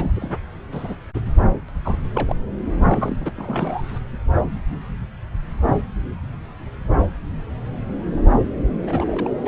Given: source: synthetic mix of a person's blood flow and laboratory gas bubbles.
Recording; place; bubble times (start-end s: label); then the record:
Doppler ultrasound of blood flow; subclavian vein
0.00-0.11 s: bubbles
0.15-0.35 s: bubbles
0.72-0.96 s: bubbles
1.15-1.21 s: bubbles
1.68-1.71 s: bubbles
1.84-1.97 s: bubbles
2.13-2.35 s: bubbles
2.88-3.16 s: bubbles
3.20-3.31 s: bubbles
3.36-3.98 s: bubbles
8.82-9.31 s: bubbles
9.38-9.48 s: bubbles
From the record:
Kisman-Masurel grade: 221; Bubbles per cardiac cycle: several, 3 to 8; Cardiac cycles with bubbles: 10 to 50%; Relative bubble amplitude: barely perceptible (0.100 to 0.250); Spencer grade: 2 (many but less than half of the cardiac periods contain bubble signals, singularly or in groups); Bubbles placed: anywhere in the cardiac cycle